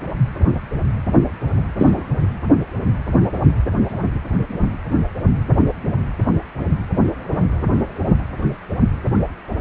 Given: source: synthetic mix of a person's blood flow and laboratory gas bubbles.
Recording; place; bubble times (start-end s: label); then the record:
Doppler ultrasound of blood flow; precordium
1.77-2.06 s: bubbles
From the record:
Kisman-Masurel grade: 113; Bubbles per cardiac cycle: 1 to 2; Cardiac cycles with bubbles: 1 to 10%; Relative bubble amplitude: loud (0.450 to 0.775); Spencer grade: 1 (occasional bubble signal discernible with the cardiac motion signal, with majority of cardiac periods free of bubbles); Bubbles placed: anywhere in the cardiac cycle